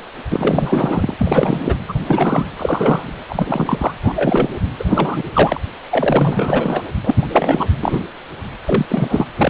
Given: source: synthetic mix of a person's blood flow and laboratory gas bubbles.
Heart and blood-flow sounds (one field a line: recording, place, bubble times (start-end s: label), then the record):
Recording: Doppler ultrasound of blood flow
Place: precordium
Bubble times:
0.00-0.02 s: bubbles
0.32-1.14 s: bubbles
1.21-1.74 s: bubbles
1.88-1.94 s: bubbles
1.98-2.46 s: bubbles
2.58-3.19 s: bubbles
3.29-3.92 s: bubbles
4.03-4.49 s: bubbles
4.79-4.83 s: bubbles
4.87-5.22 s: bubbles
5.33-5.61 s: bubbles
5.90-6.83 s: bubbles
7.04-7.15 s: bubbles
7.22-7.27 s: bubbles
7.31-7.75 s: bubbles
7.81-8.00 s: bubbles
8.65-8.85 s: bubbles
8.89-9.26 s: bubbles
9.37-9.50 s: bubbles
From the record:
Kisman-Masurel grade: 333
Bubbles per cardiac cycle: rolling drumbeat, 9 or more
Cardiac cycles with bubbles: 50 to 99%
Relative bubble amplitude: loud (0.450 to 0.775)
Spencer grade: 3 (all of the cardiac periods contain showers or single bubble signals, but not dominating or overriding the cardiac motion signals)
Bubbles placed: anywhere in the cardiac cycle